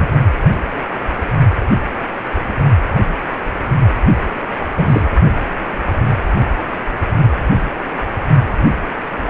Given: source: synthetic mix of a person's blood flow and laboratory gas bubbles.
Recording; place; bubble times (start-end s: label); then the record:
Doppler ultrasound of blood flow; precordium
0.00-0.09 s: bubbles
4.76-5.14 s: bubbles
From the record:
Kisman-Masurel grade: 222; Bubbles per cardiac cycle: several, 3 to 8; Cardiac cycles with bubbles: 10 to 50%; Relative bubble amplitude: moderate (0.250 to 0.450); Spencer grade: 2 (many but less than half of the cardiac periods contain bubble signals, singularly or in groups); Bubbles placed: only in the low amplitude regions of the cardiac cycle